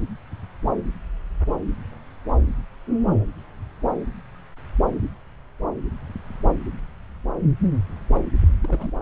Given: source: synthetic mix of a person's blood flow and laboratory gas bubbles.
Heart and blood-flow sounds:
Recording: Doppler ultrasound of blood flow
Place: subclavian vein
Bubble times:
8.62-8.91 s: bubbles
From the record:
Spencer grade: 1 (occasional bubble signal discernible with the cardiac motion signal, with majority of cardiac periods free of bubbles)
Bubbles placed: anywhere in the cardiac cycle

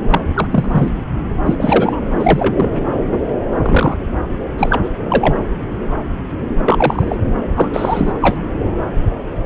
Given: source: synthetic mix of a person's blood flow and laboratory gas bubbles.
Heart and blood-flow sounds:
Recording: Doppler ultrasound of blood flow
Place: subclavian vein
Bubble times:
0.10-0.20 s: bubbles
0.34-0.47 s: bubbles
0.51-0.88 s: bubbles
1.46-2.01 s: bubbles
2.19-2.70 s: bubbles
3.62-3.98 s: bubbles
4.58-4.81 s: bubbles
4.83-4.90 s: bubbles
5.09-5.35 s: bubbles
6.65-7.16 s: bubbles
7.56-7.71 s: bubbles
7.73-8.12 s: bubbles
8.21-8.38 s: bubbles
From the record:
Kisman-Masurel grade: 223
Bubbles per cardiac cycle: several, 3 to 8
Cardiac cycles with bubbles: 10 to 50%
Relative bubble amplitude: loud (0.450 to 0.775)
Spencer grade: 2 (many but less than half of the cardiac periods contain bubble signals, singularly or in groups)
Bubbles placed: anywhere in the cardiac cycle

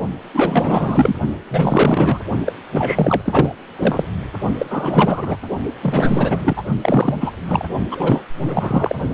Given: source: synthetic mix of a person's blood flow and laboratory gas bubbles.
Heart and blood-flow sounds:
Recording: Doppler ultrasound of blood flow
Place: precordium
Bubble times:
0.33-1.15 s: bubbles
1.50-2.21 s: bubbles
2.45-2.53 s: bubbles
2.72-3.55 s: bubbles
3.77-4.04 s: bubbles
4.58-4.66 s: bubbles
4.70-5.37 s: bubbles
5.82-6.63 s: bubbles
6.82-7.15 s: bubbles
7.20-7.31 s: bubbles
7.48-7.65 s: bubbles
7.91-8.24 s: bubbles
8.42-8.96 s: bubbles
From the record:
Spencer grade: 4 (maximum detectable bubble signal sounding continuously throughout systole and diastole of every cardiac period, and overriding the amplitude of the normal cardiac signals)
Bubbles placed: only in the low amplitude regions of the cardiac cycle

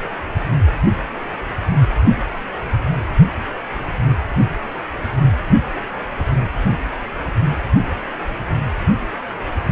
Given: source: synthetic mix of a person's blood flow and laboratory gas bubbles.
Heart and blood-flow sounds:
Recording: Doppler ultrasound of blood flow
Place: precordium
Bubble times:
no bubbles
From the record:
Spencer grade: 0 (complete lack of bubble signals)

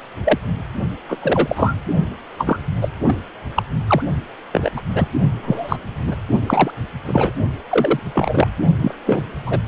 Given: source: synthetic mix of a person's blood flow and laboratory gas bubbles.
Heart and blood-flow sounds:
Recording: Doppler ultrasound of blood flow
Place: precordium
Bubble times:
0.24-0.38 s: bubbles
1.09-1.17 s: bubbles
1.21-1.74 s: bubbles
2.38-2.58 s: bubbles
2.81-2.89 s: bubbles
3.07-3.16 s: bubbles
3.56-3.63 s: bubbles
3.87-4.02 s: bubbles
4.53-4.70 s: bubbles
4.76-4.82 s: bubbles
4.95-5.08 s: bubbles
5.42-5.78 s: bubbles
6.06-6.16 s: bubbles
6.46-6.71 s: bubbles
7.05-7.33 s: bubbles
7.70-8.00 s: bubbles
8.14-8.47 s: bubbles
8.80-8.94 s: bubbles
9.06-9.23 s: bubbles
9.46-9.58 s: bubbles
From the record:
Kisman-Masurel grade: 243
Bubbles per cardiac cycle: several, 3 to 8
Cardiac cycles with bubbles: 100%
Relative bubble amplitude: loud (0.450 to 0.775)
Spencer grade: 3 (all of the cardiac periods contain showers or single bubble signals, but not dominating or overriding the cardiac motion signals)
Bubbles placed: only in the low amplitude regions of the cardiac cycle

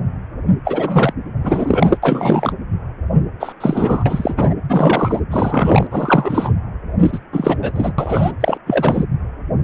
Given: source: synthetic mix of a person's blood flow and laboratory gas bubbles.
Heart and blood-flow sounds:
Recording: Doppler ultrasound of blood flow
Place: precordium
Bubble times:
0.64-1.14 s: bubbles
1.44-1.98 s: bubbles
2.02-2.52 s: bubbles
3.40-3.53 s: bubbles
3.60-4.34 s: bubbles
4.36-4.53 s: bubbles
4.69-5.20 s: bubbles
5.31-5.87 s: bubbles
5.91-6.51 s: bubbles
6.99-7.18 s: bubbles
7.32-7.57 s: bubbles
7.61-7.71 s: bubbles
7.74-7.92 s: bubbles
7.98-8.32 s: bubbles
8.40-8.57 s: bubbles
8.66-9.05 s: bubbles
From the record:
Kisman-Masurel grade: 333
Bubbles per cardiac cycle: rolling drumbeat, 9 or more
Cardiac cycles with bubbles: 50 to 99%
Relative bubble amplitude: loud (0.450 to 0.775)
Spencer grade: 3 (all of the cardiac periods contain showers or single bubble signals, but not dominating or overriding the cardiac motion signals)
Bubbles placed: anywhere in the cardiac cycle

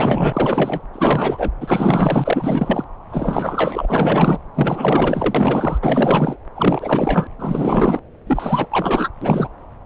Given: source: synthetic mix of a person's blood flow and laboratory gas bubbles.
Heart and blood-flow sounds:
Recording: Doppler ultrasound of blood flow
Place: subclavian vein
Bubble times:
0.00-0.81 s: bubbles
0.93-1.51 s: bubbles
1.60-2.84 s: bubbles
3.10-4.38 s: bubbles
4.55-5.80 s: bubbles
5.82-6.36 s: bubbles
6.56-7.27 s: bubbles
7.39-7.99 s: bubbles
8.26-9.09 s: bubbles
9.21-9.48 s: bubbles
From the record:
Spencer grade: 4 (maximum detectable bubble signal sounding continuously throughout systole and diastole of every cardiac period, and overriding the amplitude of the normal cardiac signals)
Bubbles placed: anywhere in the cardiac cycle

